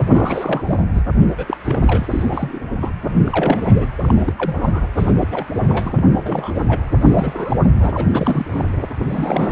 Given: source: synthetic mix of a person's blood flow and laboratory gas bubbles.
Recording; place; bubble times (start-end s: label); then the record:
Doppler ultrasound of blood flow; precordium
0.00-0.02 s: bubbles
0.12-0.84 s: bubbles
0.93-1.02 s: bubbles
1.20-1.27 s: bubbles
1.37-1.57 s: bubbles
1.65-1.79 s: bubbles
1.82-2.06 s: bubbles
2.10-2.59 s: bubbles
2.81-2.92 s: bubbles
3.08-3.88 s: bubbles
3.97-4.33 s: bubbles
4.38-4.88 s: bubbles
4.97-5.13 s: bubbles
5.21-5.28 s: bubbles
5.32-5.46 s: bubbles
5.62-5.92 s: bubbles
5.96-6.04 s: bubbles
6.09-6.53 s: bubbles
6.55-6.80 s: bubbles
6.97-7.92 s: bubbles
7.94-8.69 s: bubbles
9.04-9.51 s: bubbles
From the record:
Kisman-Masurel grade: 342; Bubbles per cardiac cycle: rolling drumbeat, 9 or more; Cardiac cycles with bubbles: 100%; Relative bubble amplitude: moderate (0.250 to 0.450); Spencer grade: 3 (all of the cardiac periods contain showers or single bubble signals, but not dominating or overriding the cardiac motion signals); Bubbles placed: anywhere in the cardiac cycle